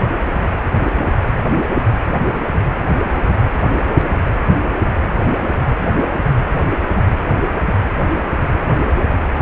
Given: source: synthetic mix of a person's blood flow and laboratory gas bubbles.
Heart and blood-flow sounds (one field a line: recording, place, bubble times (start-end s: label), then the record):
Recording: Doppler ultrasound of blood flow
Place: precordium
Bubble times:
3.04-3.12 s: bubbles
9.25-9.29 s: bubbles
From the record:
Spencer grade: 2 (many but less than half of the cardiac periods contain bubble signals, singularly or in groups)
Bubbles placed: anywhere in the cardiac cycle